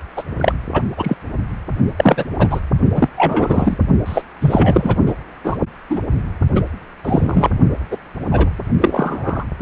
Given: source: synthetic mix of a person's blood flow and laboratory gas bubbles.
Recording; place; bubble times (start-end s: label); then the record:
Doppler ultrasound of blood flow; precordium
0.16-0.23 s: bubbles
0.37-0.53 s: bubbles
0.73-0.82 s: bubbles
0.97-1.15 s: bubbles
1.97-2.25 s: bubbles
2.38-2.61 s: bubbles
2.93-3.08 s: bubbles
3.17-3.77 s: bubbles
4.06-4.22 s: bubbles
4.40-4.96 s: bubbles
5.06-5.13 s: bubbles
5.44-5.58 s: bubbles
5.89-6.01 s: bubbles
6.55-6.62 s: bubbles
7.04-7.50 s: bubbles
7.90-7.97 s: bubbles
8.31-8.50 s: bubbles
8.80-9.44 s: bubbles
From the record:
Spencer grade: 3 (all of the cardiac periods contain showers or single bubble signals, but not dominating or overriding the cardiac motion signals); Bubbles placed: only in the low amplitude regions of the cardiac cycle